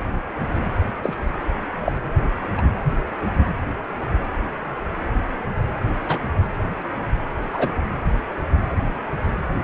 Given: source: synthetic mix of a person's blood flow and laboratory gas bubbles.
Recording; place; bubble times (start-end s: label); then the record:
Doppler ultrasound of blood flow; precordium
1.03-1.17 s: bubbles
1.81-1.93 s: bubbles
2.57-2.62 s: bubbles
6.08-6.19 s: bubbles
7.52-7.68 s: bubbles
From the record:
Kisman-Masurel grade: 123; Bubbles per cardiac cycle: 1 to 2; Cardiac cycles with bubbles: 10 to 50%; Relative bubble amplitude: loud (0.450 to 0.775); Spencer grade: 2 (many but less than half of the cardiac periods contain bubble signals, singularly or in groups); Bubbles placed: anywhere in the cardiac cycle